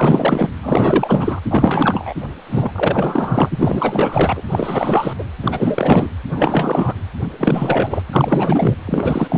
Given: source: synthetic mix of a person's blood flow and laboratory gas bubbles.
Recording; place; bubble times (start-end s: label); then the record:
Doppler ultrasound of blood flow; precordium
0.00-0.49 s: bubbles
0.60-1.40 s: bubbles
1.50-2.14 s: bubbles
2.50-2.72 s: bubbles
2.75-4.42 s: bubbles
4.48-5.13 s: bubbles
5.18-5.24 s: bubbles
5.42-6.09 s: bubbles
6.30-6.93 s: bubbles
7.38-8.03 s: bubbles
8.13-8.76 s: bubbles
8.86-9.37 s: bubbles
From the record:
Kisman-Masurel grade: 444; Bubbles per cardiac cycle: continuous sound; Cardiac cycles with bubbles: 100%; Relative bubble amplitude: maximal (0.775 to 0.999); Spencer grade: 4 (maximum detectable bubble signal sounding continuously throughout systole and diastole of every cardiac period, and overriding the amplitude of the normal cardiac signals); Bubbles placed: anywhere in the cardiac cycle